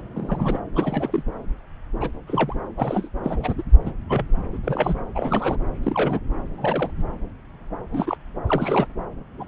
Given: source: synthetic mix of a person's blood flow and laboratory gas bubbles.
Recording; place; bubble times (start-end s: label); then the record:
Doppler ultrasound of blood flow; subclavian vein
0.15-0.59 s: bubbles
0.74-1.23 s: bubbles
2.00-2.10 s: bubbles
2.27-2.56 s: bubbles
2.77-3.09 s: bubbles
3.24-3.62 s: bubbles
3.86-3.91 s: bubbles
4.09-4.25 s: bubbles
4.53-4.58 s: bubbles
4.62-4.98 s: bubbles
5.15-5.57 s: bubbles
5.83-6.19 s: bubbles
6.57-6.91 s: bubbles
7.92-8.16 s: bubbles
8.47-8.86 s: bubbles
9.38-9.46 s: bubbles
From the record:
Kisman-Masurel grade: 232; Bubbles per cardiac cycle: several, 3 to 8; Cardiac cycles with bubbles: 50 to 99%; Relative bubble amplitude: moderate (0.250 to 0.450); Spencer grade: 3 (all of the cardiac periods contain showers or single bubble signals, but not dominating or overriding the cardiac motion signals); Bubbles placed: anywhere in the cardiac cycle